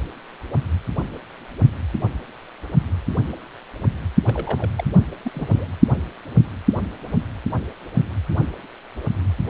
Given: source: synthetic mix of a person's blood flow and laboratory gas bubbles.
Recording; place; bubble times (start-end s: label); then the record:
Doppler ultrasound of blood flow; precordium
4.26-4.31 s: bubbles
4.34-4.69 s: bubbles
4.76-4.84 s: bubbles
5.25-5.66 s: bubbles
From the record:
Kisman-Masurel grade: 211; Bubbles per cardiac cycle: several, 3 to 8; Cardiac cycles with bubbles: 1 to 10%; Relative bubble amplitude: barely perceptible (0.100 to 0.250); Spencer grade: 1 (occasional bubble signal discernible with the cardiac motion signal, with majority of cardiac periods free of bubbles); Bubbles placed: only in the low amplitude regions of the cardiac cycle